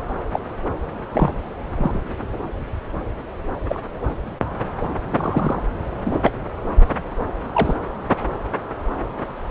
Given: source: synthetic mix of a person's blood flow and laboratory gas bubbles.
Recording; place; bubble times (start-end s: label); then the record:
Doppler ultrasound of blood flow; subclavian vein
0.32-0.40 s: bubbles
1.12-1.32 s: bubbles
1.73-2.01 s: bubbles
3.69-3.79 s: bubbles
5.10-5.61 s: bubbles
6.05-6.13 s: bubbles
6.23-6.32 s: bubbles
7.53-7.74 s: bubbles
From the record:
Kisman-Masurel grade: 122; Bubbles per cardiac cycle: 1 to 2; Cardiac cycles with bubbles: 10 to 50%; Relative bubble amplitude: moderate (0.250 to 0.450); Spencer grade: 2 (many but less than half of the cardiac periods contain bubble signals, singularly or in groups); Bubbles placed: anywhere in the cardiac cycle